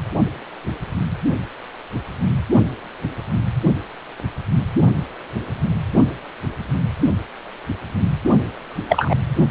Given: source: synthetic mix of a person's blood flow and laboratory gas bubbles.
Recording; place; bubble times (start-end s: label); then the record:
Doppler ultrasound of blood flow; precordium
8.88-9.15 s: bubbles
From the record:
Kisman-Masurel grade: 113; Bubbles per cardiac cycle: 1 to 2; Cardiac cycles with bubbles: 1 to 10%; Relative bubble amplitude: loud (0.450 to 0.775); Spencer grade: 1 (occasional bubble signal discernible with the cardiac motion signal, with majority of cardiac periods free of bubbles); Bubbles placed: only in the low amplitude regions of the cardiac cycle